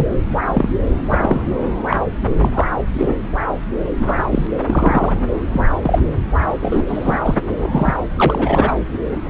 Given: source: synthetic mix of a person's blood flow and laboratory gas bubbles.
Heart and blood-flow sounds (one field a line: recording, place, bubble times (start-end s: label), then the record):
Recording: Doppler ultrasound of blood flow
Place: subclavian vein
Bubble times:
0.00-0.09 s: bubbles
0.53-0.69 s: bubbles
0.95-1.03 s: bubbles
1.09-1.42 s: bubbles
1.87-1.97 s: bubbles
2.42-2.50 s: bubbles
2.53-2.67 s: bubbles
2.90-3.15 s: bubbles
3.99-4.24 s: bubbles
4.33-4.47 s: bubbles
4.66-5.14 s: bubbles
5.51-5.62 s: bubbles
5.83-5.99 s: bubbles
6.60-6.83 s: bubbles
6.88-7.19 s: bubbles
7.23-7.34 s: bubbles
7.58-7.96 s: bubbles
8.16-8.71 s: bubbles
From the record:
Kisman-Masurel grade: 243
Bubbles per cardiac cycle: several, 3 to 8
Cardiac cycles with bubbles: 100%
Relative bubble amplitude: loud (0.450 to 0.775)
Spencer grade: 3 (all of the cardiac periods contain showers or single bubble signals, but not dominating or overriding the cardiac motion signals)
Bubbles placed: anywhere in the cardiac cycle